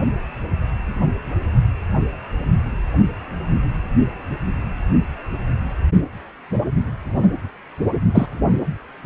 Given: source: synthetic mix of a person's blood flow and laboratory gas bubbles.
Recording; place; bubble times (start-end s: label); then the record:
Doppler ultrasound of blood flow; precordium
8.14-8.26 s: bubbles
From the record:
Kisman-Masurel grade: 113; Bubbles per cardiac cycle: 1 to 2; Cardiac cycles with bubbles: 1 to 10%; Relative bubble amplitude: loud (0.450 to 0.775); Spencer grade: 1 (occasional bubble signal discernible with the cardiac motion signal, with majority of cardiac periods free of bubbles); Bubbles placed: only in the low amplitude regions of the cardiac cycle